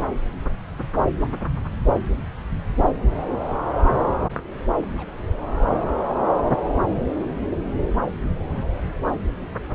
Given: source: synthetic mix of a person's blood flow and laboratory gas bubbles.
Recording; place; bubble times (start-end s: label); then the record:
Doppler ultrasound of blood flow; subclavian vein
4.82-5.11 s: bubbles
From the record:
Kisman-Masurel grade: 111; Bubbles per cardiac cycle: 1 to 2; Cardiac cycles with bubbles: 1 to 10%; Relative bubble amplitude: barely perceptible (0.100 to 0.250); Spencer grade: 1 (occasional bubble signal discernible with the cardiac motion signal, with majority of cardiac periods free of bubbles); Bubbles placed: anywhere in the cardiac cycle